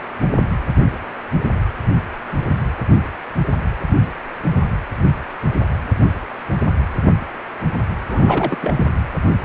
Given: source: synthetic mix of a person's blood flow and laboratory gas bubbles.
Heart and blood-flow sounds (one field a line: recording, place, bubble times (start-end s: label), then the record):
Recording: Doppler ultrasound of blood flow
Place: precordium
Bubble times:
8.09-8.57 s: bubbles
8.61-8.85 s: bubbles
From the record:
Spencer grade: 1 (occasional bubble signal discernible with the cardiac motion signal, with majority of cardiac periods free of bubbles)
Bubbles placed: anywhere in the cardiac cycle